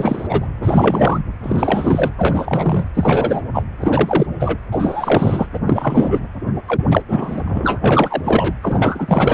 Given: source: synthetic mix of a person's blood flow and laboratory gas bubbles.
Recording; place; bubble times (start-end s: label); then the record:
Doppler ultrasound of blood flow; precordium
0.00-0.48 s: bubbles
0.62-1.23 s: bubbles
1.43-2.11 s: bubbles
2.18-2.85 s: bubbles
2.95-3.42 s: bubbles
3.53-3.63 s: bubbles
3.81-4.27 s: bubbles
4.40-4.58 s: bubbles
4.72-5.46 s: bubbles
5.54-5.60 s: bubbles
5.67-6.21 s: bubbles
6.67-6.86 s: bubbles
6.91-7.02 s: bubbles
7.08-7.80 s: bubbles
7.84-8.54 s: bubbles
8.62-9.34 s: bubbles
From the record:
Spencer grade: 3 (all of the cardiac periods contain showers or single bubble signals, but not dominating or overriding the cardiac motion signals); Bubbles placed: anywhere in the cardiac cycle